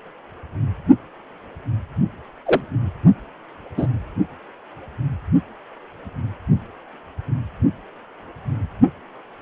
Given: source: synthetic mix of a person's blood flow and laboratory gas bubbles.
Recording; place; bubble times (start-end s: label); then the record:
Doppler ultrasound of blood flow; precordium
2.46-2.60 s: bubbles
3.77-3.87 s: bubbles
From the record:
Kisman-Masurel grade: 123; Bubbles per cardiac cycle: 1 to 2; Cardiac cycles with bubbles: 10 to 50%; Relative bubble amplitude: loud (0.450 to 0.775); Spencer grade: 2 (many but less than half of the cardiac periods contain bubble signals, singularly or in groups); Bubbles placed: only in the low amplitude regions of the cardiac cycle